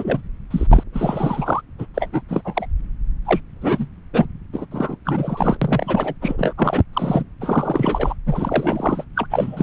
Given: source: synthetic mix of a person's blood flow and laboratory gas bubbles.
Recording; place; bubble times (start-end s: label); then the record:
Doppler ultrasound of blood flow; subclavian vein
0.00-0.22 s: bubbles
0.50-0.67 s: bubbles
0.70-0.83 s: bubbles
0.93-1.61 s: bubbles
1.78-1.87 s: bubbles
1.94-2.09 s: bubbles
2.12-2.22 s: bubbles
2.29-2.42 s: bubbles
2.44-2.66 s: bubbles
3.25-3.41 s: bubbles
3.60-3.86 s: bubbles
4.13-4.25 s: bubbles
4.52-4.65 s: bubbles
4.71-4.96 s: bubbles
5.04-5.57 s: bubbles
5.61-6.14 s: bubbles
6.20-6.53 s: bubbles
6.57-6.83 s: bubbles
6.93-7.23 s: bubbles
7.40-8.15 s: bubbles
8.26-9.04 s: bubbles
9.15-9.27 s: bubbles
9.30-9.63 s: bubbles
From the record:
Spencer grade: 3 (all of the cardiac periods contain showers or single bubble signals, but not dominating or overriding the cardiac motion signals); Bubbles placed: anywhere in the cardiac cycle